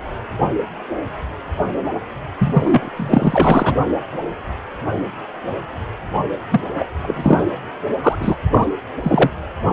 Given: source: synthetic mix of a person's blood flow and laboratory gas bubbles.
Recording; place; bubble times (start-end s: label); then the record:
Doppler ultrasound of blood flow; precordium
2.38-2.90 s: bubbles
2.96-3.75 s: bubbles
6.50-6.62 s: bubbles
6.76-6.86 s: bubbles
7.01-7.43 s: bubbles
8.03-8.17 s: bubbles
8.20-8.37 s: bubbles
8.51-8.67 s: bubbles
9.03-9.31 s: bubbles
From the record:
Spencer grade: 2 (many but less than half of the cardiac periods contain bubble signals, singularly or in groups); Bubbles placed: anywhere in the cardiac cycle